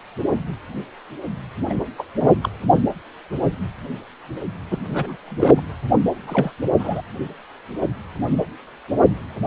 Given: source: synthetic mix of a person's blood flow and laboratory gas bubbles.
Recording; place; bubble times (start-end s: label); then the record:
Doppler ultrasound of blood flow; precordium
1.69-1.74 s: bubbles
1.98-2.03 s: bubbles
2.20-2.35 s: bubbles
2.42-2.50 s: bubbles
4.71-4.78 s: bubbles
4.93-5.17 s: bubbles
5.25-5.62 s: bubbles
6.26-6.51 s: bubbles
6.79-7.01 s: bubbles
From the record:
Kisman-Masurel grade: 222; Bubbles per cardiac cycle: several, 3 to 8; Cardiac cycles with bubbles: 10 to 50%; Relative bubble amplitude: moderate (0.250 to 0.450); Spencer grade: 2 (many but less than half of the cardiac periods contain bubble signals, singularly or in groups); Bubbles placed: anywhere in the cardiac cycle